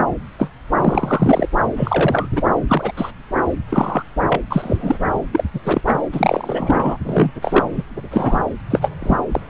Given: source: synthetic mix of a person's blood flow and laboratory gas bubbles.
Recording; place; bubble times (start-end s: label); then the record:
Doppler ultrasound of blood flow; subclavian vein
0.38-0.48 s: bubbles
0.72-0.75 s: bubbles
0.78-1.48 s: bubbles
1.76-2.29 s: bubbles
2.32-2.42 s: bubbles
2.67-2.92 s: bubbles
2.96-3.11 s: bubbles
3.69-4.03 s: bubbles
4.29-4.40 s: bubbles
4.50-4.98 s: bubbles
5.33-5.44 s: bubbles
5.54-5.59 s: bubbles
5.63-5.81 s: bubbles
5.85-6.00 s: bubbles
6.12-6.97 s: bubbles
7.04-7.31 s: bubbles
7.42-7.64 s: bubbles
7.75-7.83 s: bubbles
8.11-8.39 s: bubbles
8.70-8.90 s: bubbles
9.00-9.16 s: bubbles
9.31-9.40 s: bubbles
From the record:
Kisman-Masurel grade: 243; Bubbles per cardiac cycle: several, 3 to 8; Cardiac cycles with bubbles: 100%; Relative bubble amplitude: loud (0.450 to 0.775); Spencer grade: 3 (all of the cardiac periods contain showers or single bubble signals, but not dominating or overriding the cardiac motion signals); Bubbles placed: anywhere in the cardiac cycle